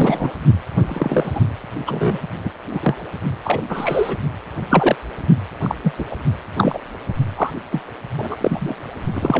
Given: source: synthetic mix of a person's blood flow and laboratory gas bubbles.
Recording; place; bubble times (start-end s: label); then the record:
Doppler ultrasound of blood flow; precordium
0.00-0.31 s: bubbles
0.88-1.41 s: bubbles
1.86-2.18 s: bubbles
2.44-2.51 s: bubbles
2.69-2.95 s: bubbles
3.45-4.17 s: bubbles
4.70-4.96 s: bubbles
5.62-5.75 s: bubbles
5.83-5.94 s: bubbles
5.98-6.05 s: bubbles
6.11-6.16 s: bubbles
6.57-6.79 s: bubbles
7.36-7.51 s: bubbles
7.71-7.82 s: bubbles
8.18-8.36 s: bubbles
8.40-8.75 s: bubbles
9.13-9.40 s: bubbles
From the record:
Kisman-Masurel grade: 243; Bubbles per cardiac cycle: several, 3 to 8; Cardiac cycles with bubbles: 100%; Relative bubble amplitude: loud (0.450 to 0.775); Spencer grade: 3 (all of the cardiac periods contain showers or single bubble signals, but not dominating or overriding the cardiac motion signals); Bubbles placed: only in the low amplitude regions of the cardiac cycle